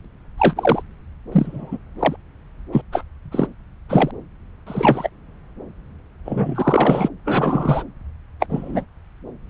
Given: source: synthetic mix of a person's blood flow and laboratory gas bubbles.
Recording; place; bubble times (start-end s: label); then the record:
Doppler ultrasound of blood flow; subclavian vein
0.38-0.82 s: bubbles
1.31-1.78 s: bubbles
1.99-2.16 s: bubbles
2.71-2.82 s: bubbles
2.92-3.04 s: bubbles
3.32-3.47 s: bubbles
3.89-4.11 s: bubbles
4.67-5.09 s: bubbles
6.25-7.08 s: bubbles
7.25-7.83 s: bubbles
8.40-8.46 s: bubbles
8.49-8.85 s: bubbles
From the record:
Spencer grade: 3 (all of the cardiac periods contain showers or single bubble signals, but not dominating or overriding the cardiac motion signals); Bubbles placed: anywhere in the cardiac cycle